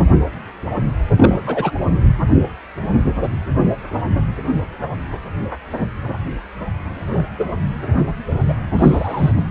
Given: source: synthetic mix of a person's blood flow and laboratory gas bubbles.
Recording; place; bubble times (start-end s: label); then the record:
Doppler ultrasound of blood flow; precordium
1.17-1.35 s: bubbles
1.46-1.72 s: bubbles
7.12-7.27 s: bubbles
7.38-7.45 s: bubbles
7.96-8.04 s: bubbles
8.47-8.55 s: bubbles
8.78-9.32 s: bubbles
From the record:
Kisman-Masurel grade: 122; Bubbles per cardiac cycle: 1 to 2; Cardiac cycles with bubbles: 10 to 50%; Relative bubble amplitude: moderate (0.250 to 0.450); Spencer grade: 2 (many but less than half of the cardiac periods contain bubble signals, singularly or in groups); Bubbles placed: anywhere in the cardiac cycle